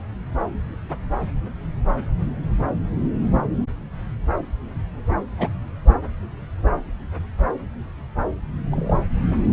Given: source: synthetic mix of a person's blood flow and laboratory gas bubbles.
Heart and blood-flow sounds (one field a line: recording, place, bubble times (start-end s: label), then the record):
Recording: Doppler ultrasound of blood flow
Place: subclavian vein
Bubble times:
5.38-5.49 s: bubbles
8.71-9.00 s: bubbles
From the record:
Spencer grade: 2 (many but less than half of the cardiac periods contain bubble signals, singularly or in groups)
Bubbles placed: anywhere in the cardiac cycle